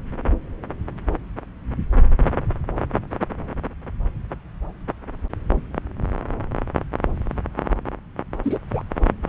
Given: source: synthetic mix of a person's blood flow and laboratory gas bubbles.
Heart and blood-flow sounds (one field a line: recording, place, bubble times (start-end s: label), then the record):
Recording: Doppler ultrasound of blood flow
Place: subclavian vein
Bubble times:
8.43-8.59 s: bubbles
8.73-8.82 s: bubbles
From the record:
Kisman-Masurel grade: 222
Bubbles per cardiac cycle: several, 3 to 8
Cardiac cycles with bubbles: 10 to 50%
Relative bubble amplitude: moderate (0.250 to 0.450)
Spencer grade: 2 (many but less than half of the cardiac periods contain bubble signals, singularly or in groups)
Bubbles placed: anywhere in the cardiac cycle